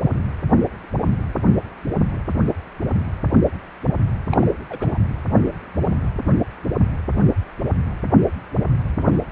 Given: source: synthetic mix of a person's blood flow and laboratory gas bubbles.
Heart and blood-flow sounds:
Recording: Doppler ultrasound of blood flow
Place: precordium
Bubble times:
4.31-4.47 s: bubbles
4.69-4.98 s: bubbles
From the record:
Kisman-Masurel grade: 212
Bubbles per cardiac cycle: several, 3 to 8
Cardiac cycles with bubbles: 1 to 10%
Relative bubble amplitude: moderate (0.250 to 0.450)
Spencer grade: 1 (occasional bubble signal discernible with the cardiac motion signal, with majority of cardiac periods free of bubbles)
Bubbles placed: anywhere in the cardiac cycle

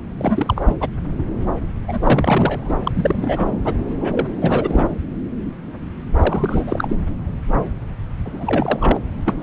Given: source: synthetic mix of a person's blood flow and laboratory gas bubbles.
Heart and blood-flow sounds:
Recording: Doppler ultrasound of blood flow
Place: subclavian vein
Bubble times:
0.18-0.61 s: bubbles
0.66-0.75 s: bubbles
0.80-0.90 s: bubbles
1.88-3.50 s: bubbles
3.63-3.74 s: bubbles
4.00-4.28 s: bubbles
4.41-4.88 s: bubbles
6.15-6.96 s: bubbles
8.25-8.99 s: bubbles
9.26-9.43 s: bubbles
From the record:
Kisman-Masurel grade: 332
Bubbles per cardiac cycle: rolling drumbeat, 9 or more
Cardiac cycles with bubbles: 50 to 99%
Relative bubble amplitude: moderate (0.250 to 0.450)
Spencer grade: 3 (all of the cardiac periods contain showers or single bubble signals, but not dominating or overriding the cardiac motion signals)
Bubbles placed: anywhere in the cardiac cycle

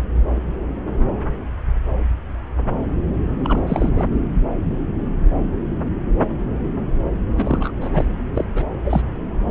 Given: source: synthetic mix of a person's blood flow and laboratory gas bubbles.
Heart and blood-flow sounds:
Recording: Doppler ultrasound of blood flow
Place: subclavian vein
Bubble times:
3.40-4.05 s: bubbles
7.34-7.72 s: bubbles
7.80-7.89 s: bubbles
7.92-8.05 s: bubbles
8.35-8.65 s: bubbles
8.83-9.01 s: bubbles
From the record:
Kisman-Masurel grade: 222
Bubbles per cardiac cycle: several, 3 to 8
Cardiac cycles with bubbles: 10 to 50%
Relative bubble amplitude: moderate (0.250 to 0.450)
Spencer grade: 2 (many but less than half of the cardiac periods contain bubble signals, singularly or in groups)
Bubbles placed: anywhere in the cardiac cycle

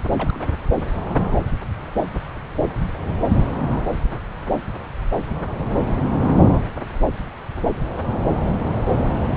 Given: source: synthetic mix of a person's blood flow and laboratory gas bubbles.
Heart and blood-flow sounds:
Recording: Doppler ultrasound of blood flow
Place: subclavian vein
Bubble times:
0.19-0.47 s: bubbles
From the record:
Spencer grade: 2 (many but less than half of the cardiac periods contain bubble signals, singularly or in groups)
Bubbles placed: anywhere in the cardiac cycle

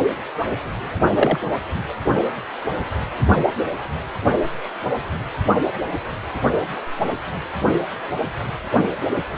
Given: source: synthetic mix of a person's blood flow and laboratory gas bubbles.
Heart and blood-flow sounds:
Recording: Doppler ultrasound of blood flow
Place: precordium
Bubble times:
1.16-1.39 s: bubbles
From the record:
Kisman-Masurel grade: 112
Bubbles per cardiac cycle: 1 to 2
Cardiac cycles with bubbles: 1 to 10%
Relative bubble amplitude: moderate (0.250 to 0.450)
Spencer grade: 1 (occasional bubble signal discernible with the cardiac motion signal, with majority of cardiac periods free of bubbles)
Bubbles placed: only in the low amplitude regions of the cardiac cycle

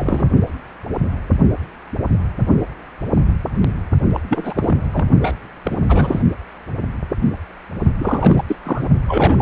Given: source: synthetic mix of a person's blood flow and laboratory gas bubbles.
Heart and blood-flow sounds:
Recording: Doppler ultrasound of blood flow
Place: precordium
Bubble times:
0.00-0.30 s: bubbles
4.13-4.20 s: bubbles
4.29-4.76 s: bubbles
4.91-5.05 s: bubbles
5.21-5.35 s: bubbles
5.63-5.77 s: bubbles
5.88-6.22 s: bubbles
7.99-8.44 s: bubbles
8.48-8.55 s: bubbles
8.63-8.88 s: bubbles
9.08-9.42 s: bubbles
From the record:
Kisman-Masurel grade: 332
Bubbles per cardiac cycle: rolling drumbeat, 9 or more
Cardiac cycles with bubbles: 50 to 99%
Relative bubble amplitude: moderate (0.250 to 0.450)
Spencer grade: 3 (all of the cardiac periods contain showers or single bubble signals, but not dominating or overriding the cardiac motion signals)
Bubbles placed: only in the low amplitude regions of the cardiac cycle

